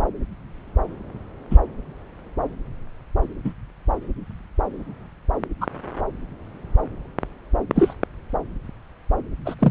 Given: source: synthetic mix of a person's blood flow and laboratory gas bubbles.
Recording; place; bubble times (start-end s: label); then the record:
Doppler ultrasound of blood flow; subclavian vein
1.51-1.57 s: bubbles
3.44-3.53 s: bubbles
5.61-5.67 s: bubbles
7.75-7.94 s: bubbles
9.46-9.54 s: bubbles
9.59-9.71 s: bubbles
From the record:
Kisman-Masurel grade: 122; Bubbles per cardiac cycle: 1 to 2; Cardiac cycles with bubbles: 10 to 50%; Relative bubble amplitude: moderate (0.250 to 0.450); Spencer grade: 2 (many but less than half of the cardiac periods contain bubble signals, singularly or in groups); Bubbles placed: anywhere in the cardiac cycle